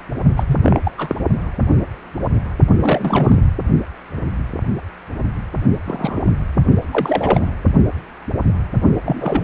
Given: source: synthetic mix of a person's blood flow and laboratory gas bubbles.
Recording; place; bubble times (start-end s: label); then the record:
Doppler ultrasound of blood flow; precordium
0.36-0.44 s: bubbles
0.47-0.58 s: bubbles
0.63-0.79 s: bubbles
0.83-0.91 s: bubbles
0.97-1.15 s: bubbles
2.81-3.41 s: bubbles
5.86-6.30 s: bubbles
6.53-6.62 s: bubbles
6.92-7.50 s: bubbles
9.04-9.44 s: bubbles
From the record:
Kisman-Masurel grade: 232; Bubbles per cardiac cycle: several, 3 to 8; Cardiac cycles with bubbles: 50 to 99%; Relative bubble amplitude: moderate (0.250 to 0.450); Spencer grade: 3 (all of the cardiac periods contain showers or single bubble signals, but not dominating or overriding the cardiac motion signals); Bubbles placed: only in the low amplitude regions of the cardiac cycle